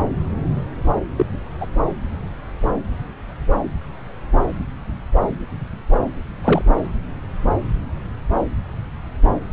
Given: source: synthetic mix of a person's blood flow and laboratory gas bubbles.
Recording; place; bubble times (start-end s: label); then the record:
Doppler ultrasound of blood flow; subclavian vein
1.17-1.26 s: bubbles
1.60-1.67 s: bubbles
6.44-6.62 s: bubbles
From the record:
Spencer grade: 2 (many but less than half of the cardiac periods contain bubble signals, singularly or in groups); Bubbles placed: anywhere in the cardiac cycle